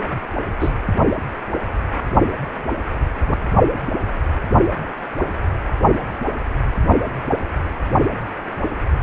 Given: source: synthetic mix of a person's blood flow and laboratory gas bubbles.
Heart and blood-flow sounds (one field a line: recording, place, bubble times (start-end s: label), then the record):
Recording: Doppler ultrasound of blood flow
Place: precordium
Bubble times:
0.60-0.70 s: bubbles
From the record:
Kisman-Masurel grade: 113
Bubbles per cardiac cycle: 1 to 2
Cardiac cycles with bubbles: 1 to 10%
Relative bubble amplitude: loud (0.450 to 0.775)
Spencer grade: 1 (occasional bubble signal discernible with the cardiac motion signal, with majority of cardiac periods free of bubbles)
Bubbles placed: only in the low amplitude regions of the cardiac cycle